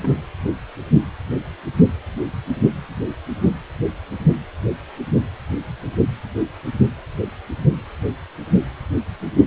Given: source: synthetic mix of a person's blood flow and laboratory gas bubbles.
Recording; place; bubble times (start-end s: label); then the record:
Doppler ultrasound of blood flow; precordium
0.02-0.22 s: bubbles
From the record:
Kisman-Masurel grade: 111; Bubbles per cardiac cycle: 1 to 2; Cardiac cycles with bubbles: 1 to 10%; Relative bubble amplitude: barely perceptible (0.100 to 0.250); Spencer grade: 1 (occasional bubble signal discernible with the cardiac motion signal, with majority of cardiac periods free of bubbles); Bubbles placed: anywhere in the cardiac cycle